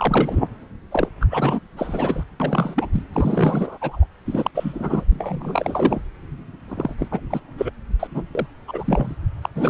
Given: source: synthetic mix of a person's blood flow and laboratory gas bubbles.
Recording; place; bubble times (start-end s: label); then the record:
Doppler ultrasound of blood flow; subclavian vein
0.00-0.48 s: bubbles
0.91-1.09 s: bubbles
1.21-1.26 s: bubbles
1.30-1.59 s: bubbles
1.76-2.24 s: bubbles
2.40-2.90 s: bubbles
2.93-3.02 s: bubbles
3.12-3.77 s: bubbles
3.81-4.06 s: bubbles
4.25-4.50 s: bubbles
4.54-5.04 s: bubbles
5.10-6.01 s: bubbles
6.68-6.95 s: bubbles
6.97-7.08 s: bubbles
7.11-7.20 s: bubbles
7.30-7.40 s: bubbles
7.58-7.70 s: bubbles
7.99-8.08 s: bubbles
8.11-8.23 s: bubbles
8.35-8.47 s: bubbles
8.68-9.16 s: bubbles
9.42-9.50 s: bubbles
9.55-9.70 s: bubbles
From the record:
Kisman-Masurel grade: 342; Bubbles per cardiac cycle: rolling drumbeat, 9 or more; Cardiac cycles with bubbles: 100%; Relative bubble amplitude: moderate (0.250 to 0.450); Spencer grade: 3 (all of the cardiac periods contain showers or single bubble signals, but not dominating or overriding the cardiac motion signals); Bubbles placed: anywhere in the cardiac cycle